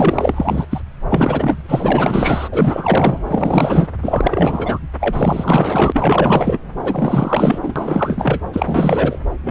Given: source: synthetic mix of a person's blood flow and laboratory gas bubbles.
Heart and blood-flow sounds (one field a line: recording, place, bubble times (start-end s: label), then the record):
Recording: Doppler ultrasound of blood flow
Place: subclavian vein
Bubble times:
0.00-0.65 s: bubbles
0.71-0.80 s: bubbles
1.09-1.62 s: bubbles
1.65-2.48 s: bubbles
2.51-3.19 s: bubbles
3.27-3.88 s: bubbles
4.02-4.79 s: bubbles
5.00-6.59 s: bubbles
6.83-7.59 s: bubbles
7.63-8.40 s: bubbles
8.53-9.19 s: bubbles
9.43-9.51 s: bubbles
From the record:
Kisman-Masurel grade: 444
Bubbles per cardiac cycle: continuous sound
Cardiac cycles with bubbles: 100%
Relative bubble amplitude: maximal (0.775 to 0.999)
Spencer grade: 4 (maximum detectable bubble signal sounding continuously throughout systole and diastole of every cardiac period, and overriding the amplitude of the normal cardiac signals)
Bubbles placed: anywhere in the cardiac cycle